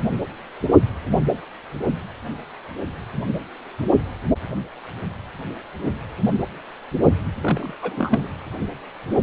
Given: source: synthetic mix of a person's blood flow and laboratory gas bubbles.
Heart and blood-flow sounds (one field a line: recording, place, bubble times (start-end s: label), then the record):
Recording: Doppler ultrasound of blood flow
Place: precordium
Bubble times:
7.41-7.77 s: bubbles
7.82-8.27 s: bubbles
From the record:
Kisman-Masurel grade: 212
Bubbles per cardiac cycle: several, 3 to 8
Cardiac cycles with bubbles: 1 to 10%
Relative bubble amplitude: moderate (0.250 to 0.450)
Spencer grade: 1 (occasional bubble signal discernible with the cardiac motion signal, with majority of cardiac periods free of bubbles)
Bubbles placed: anywhere in the cardiac cycle